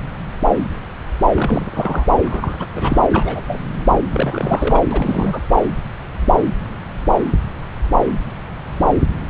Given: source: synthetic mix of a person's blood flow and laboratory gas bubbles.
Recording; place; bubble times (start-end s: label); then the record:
Doppler ultrasound of blood flow; subclavian vein
1.34-2.06 s: bubbles
2.25-2.67 s: bubbles
2.75-3.02 s: bubbles
3.12-3.42 s: bubbles
3.48-3.58 s: bubbles
4.09-4.83 s: bubbles
4.91-5.42 s: bubbles
From the record:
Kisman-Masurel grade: 222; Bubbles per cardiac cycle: several, 3 to 8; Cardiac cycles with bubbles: 10 to 50%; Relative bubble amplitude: moderate (0.250 to 0.450); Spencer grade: 2 (many but less than half of the cardiac periods contain bubble signals, singularly or in groups); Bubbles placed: anywhere in the cardiac cycle